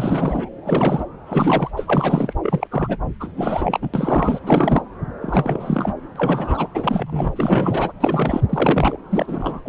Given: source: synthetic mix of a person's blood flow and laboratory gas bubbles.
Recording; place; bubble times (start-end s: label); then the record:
Doppler ultrasound of blood flow; subclavian vein
0.00-0.49 s: bubbles
0.65-1.04 s: bubbles
1.26-1.70 s: bubbles
1.76-2.33 s: bubbles
2.43-2.67 s: bubbles
2.71-2.98 s: bubbles
3.20-3.88 s: bubbles
3.94-4.39 s: bubbles
4.46-4.82 s: bubbles
5.21-5.94 s: bubbles
6.15-6.67 s: bubbles
6.75-7.92 s: bubbles
8.00-8.41 s: bubbles
8.49-8.98 s: bubbles
9.10-9.61 s: bubbles
9.65-9.69 s: bubbles
From the record:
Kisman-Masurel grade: 343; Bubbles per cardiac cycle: rolling drumbeat, 9 or more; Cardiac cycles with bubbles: 100%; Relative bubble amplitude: loud (0.450 to 0.775); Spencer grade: 3 (all of the cardiac periods contain showers or single bubble signals, but not dominating or overriding the cardiac motion signals); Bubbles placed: anywhere in the cardiac cycle